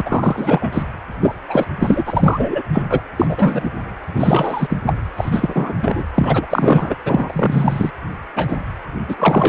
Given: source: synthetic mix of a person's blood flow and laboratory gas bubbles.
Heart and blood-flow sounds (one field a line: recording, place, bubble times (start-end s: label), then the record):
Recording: Doppler ultrasound of blood flow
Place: precordium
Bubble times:
0.05-0.82 s: bubbles
1.21-1.35 s: bubbles
1.48-1.65 s: bubbles
1.80-2.62 s: bubbles
2.73-2.83 s: bubbles
2.90-3.01 s: bubbles
3.17-3.71 s: bubbles
4.13-4.77 s: bubbles
4.86-4.94 s: bubbles
5.17-5.73 s: bubbles
5.82-6.04 s: bubbles
6.14-6.46 s: bubbles
6.50-6.96 s: bubbles
7.05-7.91 s: bubbles
8.36-8.56 s: bubbles
9.07-9.49 s: bubbles
From the record:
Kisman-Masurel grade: 343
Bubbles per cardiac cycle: rolling drumbeat, 9 or more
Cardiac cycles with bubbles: 100%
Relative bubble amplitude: loud (0.450 to 0.775)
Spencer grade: 3 (all of the cardiac periods contain showers or single bubble signals, but not dominating or overriding the cardiac motion signals)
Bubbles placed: anywhere in the cardiac cycle